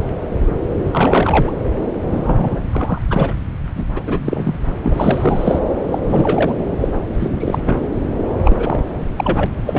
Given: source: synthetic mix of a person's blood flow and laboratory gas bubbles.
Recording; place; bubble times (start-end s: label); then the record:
Doppler ultrasound of blood flow; subclavian vein
0.80-1.50 s: bubbles
2.10-2.60 s: bubbles
2.72-3.01 s: bubbles
3.10-3.35 s: bubbles
3.77-3.85 s: bubbles
3.96-4.02 s: bubbles
4.06-4.55 s: bubbles
4.83-5.60 s: bubbles
5.91-5.99 s: bubbles
6.09-6.56 s: bubbles
6.80-6.88 s: bubbles
7.20-7.59 s: bubbles
7.65-7.82 s: bubbles
8.44-8.83 s: bubbles
9.16-9.46 s: bubbles
9.66-9.79 s: bubbles
From the record:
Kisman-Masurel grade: 333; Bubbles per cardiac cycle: rolling drumbeat, 9 or more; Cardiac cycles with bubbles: 50 to 99%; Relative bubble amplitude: loud (0.450 to 0.775); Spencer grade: 3 (all of the cardiac periods contain showers or single bubble signals, but not dominating or overriding the cardiac motion signals); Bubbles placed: anywhere in the cardiac cycle